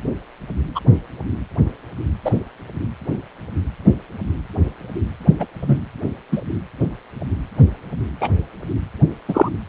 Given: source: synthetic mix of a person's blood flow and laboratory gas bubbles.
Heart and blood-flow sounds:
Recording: Doppler ultrasound of blood flow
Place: precordium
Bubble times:
0.75-0.80 s: bubbles
2.25-2.31 s: bubbles
5.39-5.46 s: bubbles
5.61-5.78 s: bubbles
6.31-6.42 s: bubbles
8.20-8.30 s: bubbles
9.28-9.49 s: bubbles
From the record:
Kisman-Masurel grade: 123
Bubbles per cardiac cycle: 1 to 2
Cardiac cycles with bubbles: 10 to 50%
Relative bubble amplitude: loud (0.450 to 0.775)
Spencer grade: 2 (many but less than half of the cardiac periods contain bubble signals, singularly or in groups)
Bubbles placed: anywhere in the cardiac cycle

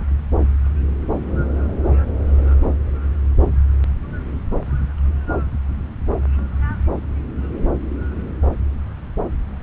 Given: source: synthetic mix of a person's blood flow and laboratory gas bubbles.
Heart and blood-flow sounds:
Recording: Doppler ultrasound of blood flow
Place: subclavian vein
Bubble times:
no bubbles
From the record:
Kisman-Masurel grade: 000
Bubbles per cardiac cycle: 0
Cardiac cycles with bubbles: 0%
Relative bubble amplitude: no bubbles discernible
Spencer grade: 0 (complete lack of bubble signals)

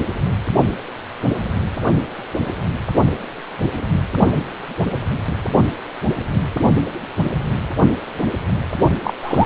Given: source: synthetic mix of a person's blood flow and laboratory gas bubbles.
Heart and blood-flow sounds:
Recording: Doppler ultrasound of blood flow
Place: precordium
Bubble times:
9.04-9.14 s: bubbles
9.22-9.46 s: bubbles
From the record:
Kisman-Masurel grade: 223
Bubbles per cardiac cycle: several, 3 to 8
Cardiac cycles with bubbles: 10 to 50%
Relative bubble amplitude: loud (0.450 to 0.775)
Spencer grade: 2 (many but less than half of the cardiac periods contain bubble signals, singularly or in groups)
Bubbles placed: only in the low amplitude regions of the cardiac cycle

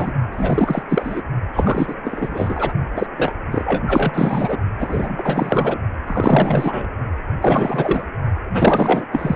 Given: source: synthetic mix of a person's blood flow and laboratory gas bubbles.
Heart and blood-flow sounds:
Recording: Doppler ultrasound of blood flow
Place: precordium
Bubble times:
0.00-0.13 s: bubbles
0.32-0.83 s: bubbles
0.89-1.22 s: bubbles
1.53-1.95 s: bubbles
2.04-2.73 s: bubbles
2.95-3.06 s: bubbles
3.17-3.35 s: bubbles
3.51-4.58 s: bubbles
4.79-5.79 s: bubbles
6.06-6.86 s: bubbles
7.41-8.05 s: bubbles
8.49-9.05 s: bubbles
9.12-9.36 s: bubbles
From the record:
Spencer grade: 4 (maximum detectable bubble signal sounding continuously throughout systole and diastole of every cardiac period, and overriding the amplitude of the normal cardiac signals)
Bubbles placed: only in the low amplitude regions of the cardiac cycle

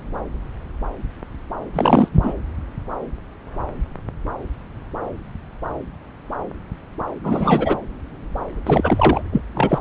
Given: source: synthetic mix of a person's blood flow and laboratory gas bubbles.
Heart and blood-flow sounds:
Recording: Doppler ultrasound of blood flow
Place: subclavian vein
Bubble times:
1.73-2.08 s: bubbles
2.12-2.33 s: bubbles
7.24-7.77 s: bubbles
8.66-9.22 s: bubbles
9.32-9.42 s: bubbles
9.54-9.79 s: bubbles
From the record:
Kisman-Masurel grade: 222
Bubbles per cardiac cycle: several, 3 to 8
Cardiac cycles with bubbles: 10 to 50%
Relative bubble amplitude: moderate (0.250 to 0.450)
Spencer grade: 2 (many but less than half of the cardiac periods contain bubble signals, singularly or in groups)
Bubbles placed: anywhere in the cardiac cycle

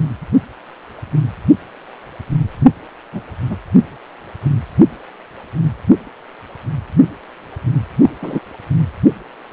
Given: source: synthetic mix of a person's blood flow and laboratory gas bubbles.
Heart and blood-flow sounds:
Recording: Doppler ultrasound of blood flow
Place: precordium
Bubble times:
3.12-3.21 s: bubbles
3.48-3.56 s: bubbles
8.02-8.10 s: bubbles
8.21-8.39 s: bubbles
From the record:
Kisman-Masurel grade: 123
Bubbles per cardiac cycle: 1 to 2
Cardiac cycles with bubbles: 10 to 50%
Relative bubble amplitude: loud (0.450 to 0.775)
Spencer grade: 2 (many but less than half of the cardiac periods contain bubble signals, singularly or in groups)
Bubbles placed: anywhere in the cardiac cycle

